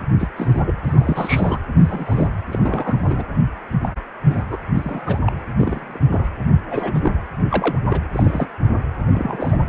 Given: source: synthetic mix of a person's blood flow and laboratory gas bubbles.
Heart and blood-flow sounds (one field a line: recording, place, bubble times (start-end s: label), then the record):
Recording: Doppler ultrasound of blood flow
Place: precordium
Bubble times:
0.18-0.29 s: bubbles
0.36-0.62 s: bubbles
0.66-0.73 s: bubbles
0.83-1.59 s: bubbles
1.79-2.27 s: bubbles
2.51-2.98 s: bubbles
3.04-3.23 s: bubbles
3.83-3.89 s: bubbles
4.26-4.44 s: bubbles
4.50-4.58 s: bubbles
4.74-5.19 s: bubbles
5.26-5.33 s: bubbles
5.58-6.00 s: bubbles
6.11-6.29 s: bubbles
6.71-7.00 s: bubbles
7.03-7.12 s: bubbles
7.49-7.79 s: bubbles
7.89-8.01 s: bubbles
8.12-8.46 s: bubbles
9.12-9.60 s: bubbles
From the record:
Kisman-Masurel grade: 242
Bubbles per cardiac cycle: several, 3 to 8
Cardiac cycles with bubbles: 100%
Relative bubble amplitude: moderate (0.250 to 0.450)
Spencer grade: 3 (all of the cardiac periods contain showers or single bubble signals, but not dominating or overriding the cardiac motion signals)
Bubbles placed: anywhere in the cardiac cycle